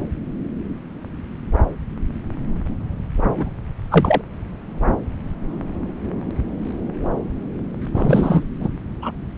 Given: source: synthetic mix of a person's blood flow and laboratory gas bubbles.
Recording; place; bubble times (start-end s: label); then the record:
Doppler ultrasound of blood flow; subclavian vein
3.36-3.49 s: bubbles
3.90-4.21 s: bubbles
7.93-8.43 s: bubbles
8.59-8.69 s: bubbles
9.01-9.11 s: bubbles
From the record:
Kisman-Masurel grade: 223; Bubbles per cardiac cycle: several, 3 to 8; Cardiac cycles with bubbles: 10 to 50%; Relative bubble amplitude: loud (0.450 to 0.775); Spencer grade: 2 (many but less than half of the cardiac periods contain bubble signals, singularly or in groups); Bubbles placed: anywhere in the cardiac cycle